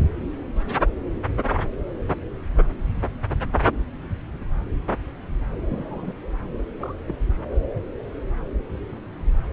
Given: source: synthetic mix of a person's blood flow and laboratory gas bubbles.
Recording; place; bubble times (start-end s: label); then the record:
Doppler ultrasound of blood flow; subclavian vein
5.67-6.13 s: bubbles
6.79-6.94 s: bubbles
7.07-7.15 s: bubbles
From the record:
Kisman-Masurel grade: 121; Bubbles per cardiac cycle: 1 to 2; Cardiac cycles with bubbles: 10 to 50%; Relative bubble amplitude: barely perceptible (0.100 to 0.250); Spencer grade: 2 (many but less than half of the cardiac periods contain bubble signals, singularly or in groups); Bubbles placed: anywhere in the cardiac cycle